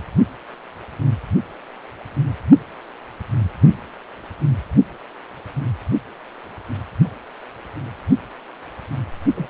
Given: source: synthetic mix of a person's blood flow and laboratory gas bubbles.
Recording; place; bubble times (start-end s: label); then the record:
Doppler ultrasound of blood flow; precordium
9.36-9.50 s: bubbles
From the record:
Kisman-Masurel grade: 212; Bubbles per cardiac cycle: several, 3 to 8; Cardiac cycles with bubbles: 1 to 10%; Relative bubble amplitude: moderate (0.250 to 0.450); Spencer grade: 1 (occasional bubble signal discernible with the cardiac motion signal, with majority of cardiac periods free of bubbles); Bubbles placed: only in the low amplitude regions of the cardiac cycle